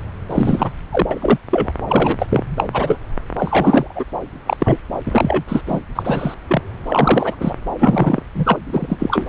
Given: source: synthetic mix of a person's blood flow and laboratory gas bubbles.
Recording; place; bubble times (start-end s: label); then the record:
Doppler ultrasound of blood flow; subclavian vein
0.30-0.72 s: bubbles
0.91-1.06 s: bubbles
1.10-1.39 s: bubbles
1.51-1.72 s: bubbles
1.88-2.27 s: bubbles
2.29-2.44 s: bubbles
2.58-2.64 s: bubbles
2.73-2.98 s: bubbles
3.39-4.04 s: bubbles
4.47-4.78 s: bubbles
5.05-5.43 s: bubbles
5.48-5.61 s: bubbles
5.66-5.81 s: bubbles
5.95-6.35 s: bubbles
6.49-6.62 s: bubbles
6.87-7.36 s: bubbles
7.40-7.54 s: bubbles
7.79-8.21 s: bubbles
8.34-8.58 s: bubbles
8.72-9.26 s: bubbles
From the record:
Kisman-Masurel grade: 243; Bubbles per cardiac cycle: several, 3 to 8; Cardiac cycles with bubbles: 100%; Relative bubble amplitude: loud (0.450 to 0.775); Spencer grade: 3 (all of the cardiac periods contain showers or single bubble signals, but not dominating or overriding the cardiac motion signals); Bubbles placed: anywhere in the cardiac cycle